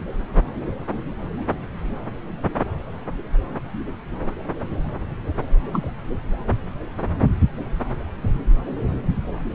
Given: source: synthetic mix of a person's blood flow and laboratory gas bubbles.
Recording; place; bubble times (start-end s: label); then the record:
Doppler ultrasound of blood flow; subclavian vein
5.73-5.88 s: bubbles
From the record:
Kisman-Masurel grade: 112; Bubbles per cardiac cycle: 1 to 2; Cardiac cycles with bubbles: 1 to 10%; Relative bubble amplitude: moderate (0.250 to 0.450); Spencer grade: 1 (occasional bubble signal discernible with the cardiac motion signal, with majority of cardiac periods free of bubbles); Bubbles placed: anywhere in the cardiac cycle